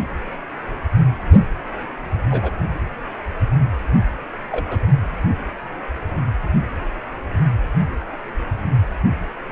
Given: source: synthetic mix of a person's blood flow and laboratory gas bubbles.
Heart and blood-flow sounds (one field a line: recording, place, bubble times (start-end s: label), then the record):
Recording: Doppler ultrasound of blood flow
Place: precordium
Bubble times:
2.31-2.52 s: bubbles
4.51-4.89 s: bubbles
From the record:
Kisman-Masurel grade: 122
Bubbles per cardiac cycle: 1 to 2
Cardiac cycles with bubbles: 10 to 50%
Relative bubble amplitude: moderate (0.250 to 0.450)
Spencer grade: 2 (many but less than half of the cardiac periods contain bubble signals, singularly or in groups)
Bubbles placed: anywhere in the cardiac cycle